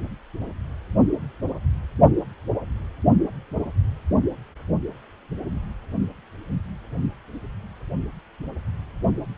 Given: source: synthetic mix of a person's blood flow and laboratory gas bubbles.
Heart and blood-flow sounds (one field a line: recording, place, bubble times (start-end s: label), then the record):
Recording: Doppler ultrasound of blood flow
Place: precordium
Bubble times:
no bubbles
From the record:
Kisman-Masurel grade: 000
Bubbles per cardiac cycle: 0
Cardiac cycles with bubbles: 0%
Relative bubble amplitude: no bubbles discernible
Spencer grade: 0 (complete lack of bubble signals)